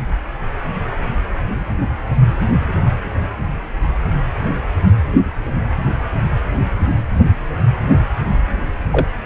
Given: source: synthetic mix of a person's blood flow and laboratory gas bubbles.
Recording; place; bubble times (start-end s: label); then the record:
Doppler ultrasound of blood flow; precordium
8.90-9.07 s: bubbles
From the record:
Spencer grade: 1 (occasional bubble signal discernible with the cardiac motion signal, with majority of cardiac periods free of bubbles); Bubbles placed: anywhere in the cardiac cycle